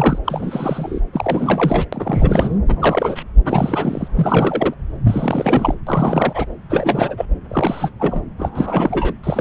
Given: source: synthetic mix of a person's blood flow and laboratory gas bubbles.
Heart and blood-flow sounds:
Doppler ultrasound of blood flow; subclavian vein
0.00-0.19 s: bubbles
0.24-1.00 s: bubbles
1.13-1.85 s: bubbles
1.92-2.58 s: bubbles
2.69-3.23 s: bubbles
3.44-4.08 s: bubbles
4.15-4.74 s: bubbles
5.04-5.75 s: bubbles
5.87-6.46 s: bubbles
6.70-7.25 s: bubbles
7.50-7.91 s: bubbles
7.99-8.22 s: bubbles
8.38-9.13 s: bubbles
9.23-9.41 s: bubbles
From the record:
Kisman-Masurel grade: 342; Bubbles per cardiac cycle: rolling drumbeat, 9 or more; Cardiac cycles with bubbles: 100%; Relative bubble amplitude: moderate (0.250 to 0.450); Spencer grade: 3 (all of the cardiac periods contain showers or single bubble signals, but not dominating or overriding the cardiac motion signals); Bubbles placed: anywhere in the cardiac cycle

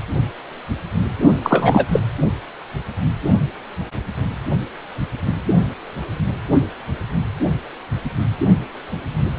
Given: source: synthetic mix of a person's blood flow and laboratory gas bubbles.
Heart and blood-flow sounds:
Doppler ultrasound of blood flow; precordium
1.43-1.86 s: bubbles
1.92-2.00 s: bubbles
From the record:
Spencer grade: 1 (occasional bubble signal discernible with the cardiac motion signal, with majority of cardiac periods free of bubbles); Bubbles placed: only in the low amplitude regions of the cardiac cycle

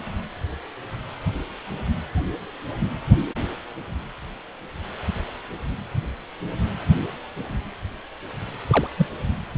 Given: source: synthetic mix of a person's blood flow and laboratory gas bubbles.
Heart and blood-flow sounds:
Doppler ultrasound of blood flow; precordium
8.68-8.88 s: bubbles
8.96-9.06 s: bubbles
From the record:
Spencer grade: 1 (occasional bubble signal discernible with the cardiac motion signal, with majority of cardiac periods free of bubbles); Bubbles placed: anywhere in the cardiac cycle

